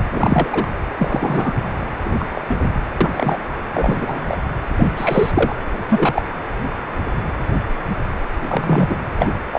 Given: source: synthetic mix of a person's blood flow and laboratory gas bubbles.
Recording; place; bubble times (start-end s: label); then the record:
Doppler ultrasound of blood flow; precordium
0.10-0.71 s: bubbles
0.98-1.61 s: bubbles
2.04-2.41 s: bubbles
2.49-2.69 s: bubbles
3.00-3.39 s: bubbles
3.73-4.48 s: bubbles
4.77-4.93 s: bubbles
4.97-5.32 s: bubbles
5.35-5.54 s: bubbles
5.89-6.22 s: bubbles
8.43-8.97 s: bubbles
9.19-9.32 s: bubbles
9.53-9.59 s: bubbles
From the record:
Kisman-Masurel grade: 233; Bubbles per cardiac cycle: several, 3 to 8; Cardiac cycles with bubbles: 50 to 99%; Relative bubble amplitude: loud (0.450 to 0.775); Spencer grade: 3 (all of the cardiac periods contain showers or single bubble signals, but not dominating or overriding the cardiac motion signals); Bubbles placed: anywhere in the cardiac cycle